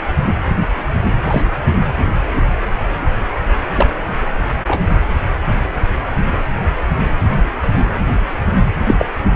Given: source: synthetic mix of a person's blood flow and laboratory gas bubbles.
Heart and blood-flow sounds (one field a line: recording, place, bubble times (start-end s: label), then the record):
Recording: Doppler ultrasound of blood flow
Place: precordium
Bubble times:
1.23-1.43 s: bubbles
3.75-3.86 s: bubbles
4.67-4.81 s: bubbles
8.87-8.94 s: bubbles
8.98-9.11 s: bubbles
From the record:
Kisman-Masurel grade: 123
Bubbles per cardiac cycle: 1 to 2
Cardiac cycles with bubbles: 10 to 50%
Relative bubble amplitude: loud (0.450 to 0.775)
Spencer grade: 2 (many but less than half of the cardiac periods contain bubble signals, singularly or in groups)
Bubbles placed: anywhere in the cardiac cycle